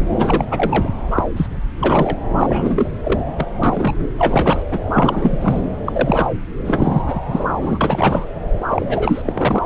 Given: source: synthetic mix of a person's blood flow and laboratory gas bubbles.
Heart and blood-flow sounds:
Doppler ultrasound of blood flow; subclavian vein
0.18-0.47 s: bubbles
0.51-0.89 s: bubbles
1.10-1.24 s: bubbles
1.36-1.47 s: bubbles
1.81-2.17 s: bubbles
2.38-3.00 s: bubbles
3.03-3.20 s: bubbles
3.37-3.48 s: bubbles
3.63-3.97 s: bubbles
4.18-4.63 s: bubbles
4.71-4.80 s: bubbles
4.92-5.62 s: bubbles
5.86-6.26 s: bubbles
6.66-7.02 s: bubbles
7.06-7.20 s: bubbles
7.28-7.44 s: bubbles
7.58-8.25 s: bubbles
8.70-9.22 s: bubbles
9.26-9.59 s: bubbles
From the record:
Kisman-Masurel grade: 342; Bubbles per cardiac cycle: rolling drumbeat, 9 or more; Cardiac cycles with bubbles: 100%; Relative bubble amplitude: moderate (0.250 to 0.450); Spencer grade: 3 (all of the cardiac periods contain showers or single bubble signals, but not dominating or overriding the cardiac motion signals); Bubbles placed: anywhere in the cardiac cycle

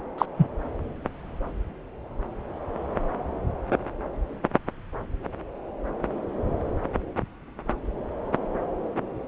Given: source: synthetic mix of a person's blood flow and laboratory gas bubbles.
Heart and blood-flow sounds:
Doppler ultrasound of blood flow; subclavian vein
0.18-0.26 s: bubbles
0.37-0.47 s: bubbles
From the record:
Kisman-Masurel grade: 123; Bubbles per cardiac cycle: 1 to 2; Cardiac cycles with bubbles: 10 to 50%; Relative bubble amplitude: loud (0.450 to 0.775); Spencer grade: 2 (many but less than half of the cardiac periods contain bubble signals, singularly or in groups); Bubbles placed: anywhere in the cardiac cycle

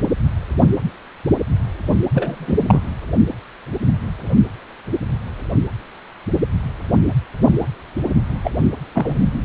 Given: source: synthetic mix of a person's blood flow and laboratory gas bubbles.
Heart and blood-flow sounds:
Doppler ultrasound of blood flow; precordium
2.14-2.60 s: bubbles
2.67-2.81 s: bubbles
8.44-8.51 s: bubbles
8.93-9.28 s: bubbles
From the record:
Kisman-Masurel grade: 222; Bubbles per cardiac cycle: several, 3 to 8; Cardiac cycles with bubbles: 10 to 50%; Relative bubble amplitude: moderate (0.250 to 0.450); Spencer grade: 2 (many but less than half of the cardiac periods contain bubble signals, singularly or in groups); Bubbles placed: only in the low amplitude regions of the cardiac cycle

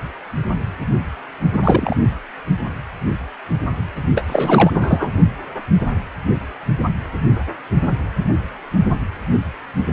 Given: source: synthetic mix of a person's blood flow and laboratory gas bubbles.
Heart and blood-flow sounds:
Doppler ultrasound of blood flow; precordium
1.52-1.59 s: bubbles
1.62-1.96 s: bubbles
4.15-4.71 s: bubbles
4.73-5.08 s: bubbles
From the record:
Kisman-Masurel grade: 223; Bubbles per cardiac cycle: several, 3 to 8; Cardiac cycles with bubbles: 10 to 50%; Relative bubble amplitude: loud (0.450 to 0.775); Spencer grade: 2 (many but less than half of the cardiac periods contain bubble signals, singularly or in groups); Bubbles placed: only in the low amplitude regions of the cardiac cycle

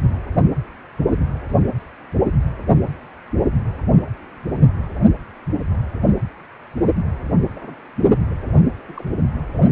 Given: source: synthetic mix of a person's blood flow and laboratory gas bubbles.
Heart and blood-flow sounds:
Doppler ultrasound of blood flow; precordium
7.55-7.75 s: bubbles
8.30-8.35 s: bubbles
8.87-9.05 s: bubbles
From the record:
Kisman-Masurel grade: 121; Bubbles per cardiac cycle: 1 to 2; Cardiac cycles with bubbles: 10 to 50%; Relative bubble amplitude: barely perceptible (0.100 to 0.250); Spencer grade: 2 (many but less than half of the cardiac periods contain bubble signals, singularly or in groups); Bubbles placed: anywhere in the cardiac cycle

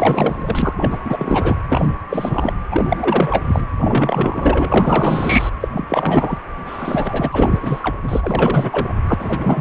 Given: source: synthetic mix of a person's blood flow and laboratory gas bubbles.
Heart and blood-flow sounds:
Doppler ultrasound of blood flow; precordium
0.00-0.73 s: bubbles
0.76-0.98 s: bubbles
1.04-1.56 s: bubbles
1.68-1.95 s: bubbles
2.10-2.54 s: bubbles
2.71-3.67 s: bubbles
3.80-5.50 s: bubbles
5.60-5.68 s: bubbles
5.72-6.38 s: bubbles
6.67-7.96 s: bubbles
8.03-8.94 s: bubbles
9.06-9.14 s: bubbles
9.20-9.61 s: bubbles
From the record:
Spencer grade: 4 (maximum detectable bubble signal sounding continuously throughout systole and diastole of every cardiac period, and overriding the amplitude of the normal cardiac signals); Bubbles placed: anywhere in the cardiac cycle

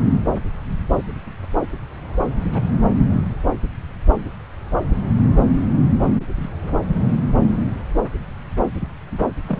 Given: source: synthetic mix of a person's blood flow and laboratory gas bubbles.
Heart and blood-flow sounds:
Doppler ultrasound of blood flow; subclavian vein
2.53-2.62 s: bubbles
9.47-9.60 s: bubbles
From the record:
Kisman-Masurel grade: 122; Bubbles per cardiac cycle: 1 to 2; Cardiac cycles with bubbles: 10 to 50%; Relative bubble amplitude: moderate (0.250 to 0.450); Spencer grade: 2 (many but less than half of the cardiac periods contain bubble signals, singularly or in groups); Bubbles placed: anywhere in the cardiac cycle

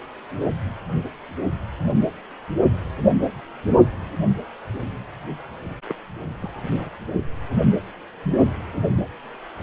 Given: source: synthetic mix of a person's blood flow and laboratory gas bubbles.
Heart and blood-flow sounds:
Doppler ultrasound of blood flow; precordium
5.88-5.95 s: bubbles
6.40-6.61 s: bubbles
6.69-6.72 s: bubbles
6.75-6.89 s: bubbles
From the record:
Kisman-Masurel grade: 221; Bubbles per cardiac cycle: several, 3 to 8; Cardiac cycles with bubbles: 10 to 50%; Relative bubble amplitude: barely perceptible (0.100 to 0.250); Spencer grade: 2 (many but less than half of the cardiac periods contain bubble signals, singularly or in groups); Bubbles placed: only in the low amplitude regions of the cardiac cycle

